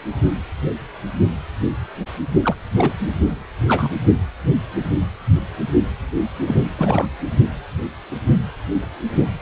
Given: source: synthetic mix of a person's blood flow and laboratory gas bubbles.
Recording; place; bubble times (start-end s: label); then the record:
Doppler ultrasound of blood flow; precordium
2.42-2.55 s: bubbles
2.76-2.93 s: bubbles
3.00-3.07 s: bubbles
3.26-3.33 s: bubbles
3.67-3.89 s: bubbles
6.44-6.59 s: bubbles
6.63-6.70 s: bubbles
6.76-7.08 s: bubbles
From the record:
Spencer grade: 1 (occasional bubble signal discernible with the cardiac motion signal, with majority of cardiac periods free of bubbles); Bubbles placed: only in the low amplitude regions of the cardiac cycle